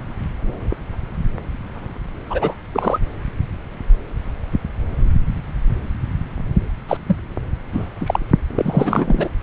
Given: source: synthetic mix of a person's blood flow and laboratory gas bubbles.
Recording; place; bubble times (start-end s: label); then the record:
Doppler ultrasound of blood flow; subclavian vein
2.29-2.54 s: bubbles
2.73-2.99 s: bubbles
6.88-6.97 s: bubbles
7.07-7.17 s: bubbles
7.73-7.89 s: bubbles
8.01-8.20 s: bubbles
8.48-9.29 s: bubbles
From the record:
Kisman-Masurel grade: 223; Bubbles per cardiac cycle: several, 3 to 8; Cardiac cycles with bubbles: 10 to 50%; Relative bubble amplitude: loud (0.450 to 0.775); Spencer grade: 2 (many but less than half of the cardiac periods contain bubble signals, singularly or in groups); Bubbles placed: anywhere in the cardiac cycle